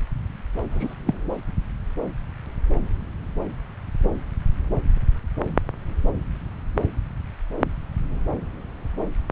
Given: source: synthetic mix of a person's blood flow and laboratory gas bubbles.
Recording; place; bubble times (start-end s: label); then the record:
Doppler ultrasound of blood flow; subclavian vein
0.71-0.95 s: bubbles
1.06-1.14 s: bubbles
From the record:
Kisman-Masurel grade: 112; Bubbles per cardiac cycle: 1 to 2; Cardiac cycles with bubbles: 1 to 10%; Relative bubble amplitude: moderate (0.250 to 0.450); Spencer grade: 1 (occasional bubble signal discernible with the cardiac motion signal, with majority of cardiac periods free of bubbles); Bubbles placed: anywhere in the cardiac cycle